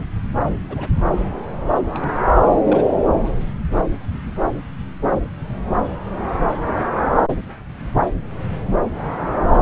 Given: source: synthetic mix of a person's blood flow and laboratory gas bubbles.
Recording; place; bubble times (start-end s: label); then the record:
Doppler ultrasound of blood flow; subclavian vein
0.69-0.88 s: bubbles
1.94-2.16 s: bubbles
2.67-2.85 s: bubbles
6.28-6.36 s: bubbles
9.43-9.48 s: bubbles
From the record:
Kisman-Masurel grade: 121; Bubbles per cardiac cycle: 1 to 2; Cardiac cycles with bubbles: 10 to 50%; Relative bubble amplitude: barely perceptible (0.100 to 0.250); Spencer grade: 2 (many but less than half of the cardiac periods contain bubble signals, singularly or in groups); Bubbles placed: anywhere in the cardiac cycle